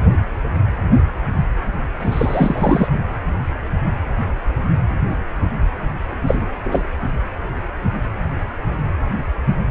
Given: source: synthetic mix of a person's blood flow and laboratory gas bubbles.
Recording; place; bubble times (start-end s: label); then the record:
Doppler ultrasound of blood flow; precordium
1.99-2.88 s: bubbles
2.92-2.99 s: bubbles
6.21-6.46 s: bubbles
6.64-6.85 s: bubbles
From the record:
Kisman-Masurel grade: 223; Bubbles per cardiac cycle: several, 3 to 8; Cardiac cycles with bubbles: 10 to 50%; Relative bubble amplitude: loud (0.450 to 0.775); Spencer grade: 2 (many but less than half of the cardiac periods contain bubble signals, singularly or in groups); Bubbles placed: anywhere in the cardiac cycle